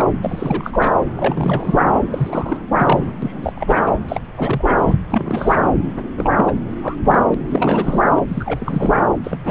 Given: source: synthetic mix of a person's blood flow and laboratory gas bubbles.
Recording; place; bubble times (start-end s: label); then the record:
Doppler ultrasound of blood flow; subclavian vein
0.00-0.05 s: bubbles
0.21-0.90 s: bubbles
1.16-1.89 s: bubbles
2.10-2.66 s: bubbles
2.73-3.12 s: bubbles
3.22-3.82 s: bubbles
3.85-3.94 s: bubbles
4.08-4.20 s: bubbles
4.35-4.95 s: bubbles
5.10-5.63 s: bubbles
6.18-6.53 s: bubbles
6.81-6.96 s: bubbles
7.04-7.20 s: bubbles
7.30-7.35 s: bubbles
7.48-8.00 s: bubbles
8.15-8.21 s: bubbles
8.28-9.01 s: bubbles
9.23-9.51 s: bubbles
From the record:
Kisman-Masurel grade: 342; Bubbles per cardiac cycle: rolling drumbeat, 9 or more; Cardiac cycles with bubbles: 100%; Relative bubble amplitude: moderate (0.250 to 0.450); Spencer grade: 3 (all of the cardiac periods contain showers or single bubble signals, but not dominating or overriding the cardiac motion signals); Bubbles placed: anywhere in the cardiac cycle